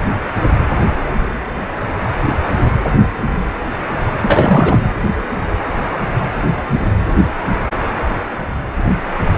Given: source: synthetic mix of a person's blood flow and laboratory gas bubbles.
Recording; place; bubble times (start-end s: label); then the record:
Doppler ultrasound of blood flow; precordium
4.22-4.78 s: bubbles
From the record:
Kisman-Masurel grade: 213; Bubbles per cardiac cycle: several, 3 to 8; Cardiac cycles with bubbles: 1 to 10%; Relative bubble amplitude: loud (0.450 to 0.775); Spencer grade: 1 (occasional bubble signal discernible with the cardiac motion signal, with majority of cardiac periods free of bubbles); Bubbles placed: anywhere in the cardiac cycle